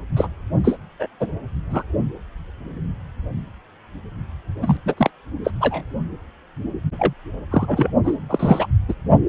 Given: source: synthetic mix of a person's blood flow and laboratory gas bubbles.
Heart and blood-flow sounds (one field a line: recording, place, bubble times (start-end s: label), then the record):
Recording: Doppler ultrasound of blood flow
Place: precordium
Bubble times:
0.17-0.28 s: bubbles
0.64-0.77 s: bubbles
1.00-1.07 s: bubbles
1.20-1.28 s: bubbles
1.70-1.83 s: bubbles
4.62-4.78 s: bubbles
4.86-4.94 s: bubbles
4.97-5.10 s: bubbles
5.44-5.50 s: bubbles
5.61-5.84 s: bubbles
6.99-7.13 s: bubbles
7.50-7.91 s: bubbles
8.04-8.16 s: bubbles
8.29-8.67 s: bubbles
8.88-8.94 s: bubbles
From the record:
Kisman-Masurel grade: 233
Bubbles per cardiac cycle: several, 3 to 8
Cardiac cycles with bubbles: 50 to 99%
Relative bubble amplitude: loud (0.450 to 0.775)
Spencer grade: 3 (all of the cardiac periods contain showers or single bubble signals, but not dominating or overriding the cardiac motion signals)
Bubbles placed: only in the low amplitude regions of the cardiac cycle